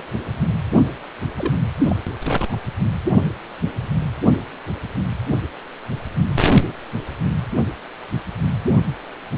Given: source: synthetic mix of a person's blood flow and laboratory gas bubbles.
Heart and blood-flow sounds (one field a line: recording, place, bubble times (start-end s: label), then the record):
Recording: Doppler ultrasound of blood flow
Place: precordium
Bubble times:
1.38-1.53 s: bubbles
1.88-1.96 s: bubbles
2.25-2.56 s: bubbles
From the record:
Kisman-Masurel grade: 122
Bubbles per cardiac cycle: 1 to 2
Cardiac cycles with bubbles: 10 to 50%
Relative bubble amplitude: moderate (0.250 to 0.450)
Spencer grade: 2 (many but less than half of the cardiac periods contain bubble signals, singularly or in groups)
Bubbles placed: anywhere in the cardiac cycle